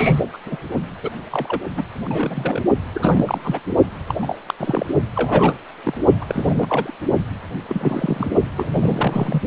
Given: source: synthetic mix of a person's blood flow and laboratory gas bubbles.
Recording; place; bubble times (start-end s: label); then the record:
Doppler ultrasound of blood flow; precordium
0.00-0.21 s: bubbles
0.34-0.38 s: bubbles
0.46-0.57 s: bubbles
1.03-1.10 s: bubbles
1.31-1.59 s: bubbles
1.77-1.83 s: bubbles
2.05-2.62 s: bubbles
2.94-3.60 s: bubbles
4.08-4.14 s: bubbles
4.21-4.40 s: bubbles
4.46-4.54 s: bubbles
4.59-4.86 s: bubbles
5.16-5.54 s: bubbles
5.84-5.98 s: bubbles
6.21-6.25 s: bubbles
6.29-6.93 s: bubbles
7.68-8.33 s: bubbles
8.56-9.42 s: bubbles
From the record:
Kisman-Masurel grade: 342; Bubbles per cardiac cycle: rolling drumbeat, 9 or more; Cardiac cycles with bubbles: 100%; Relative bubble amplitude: moderate (0.250 to 0.450); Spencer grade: 3 (all of the cardiac periods contain showers or single bubble signals, but not dominating or overriding the cardiac motion signals); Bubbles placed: only in the low amplitude regions of the cardiac cycle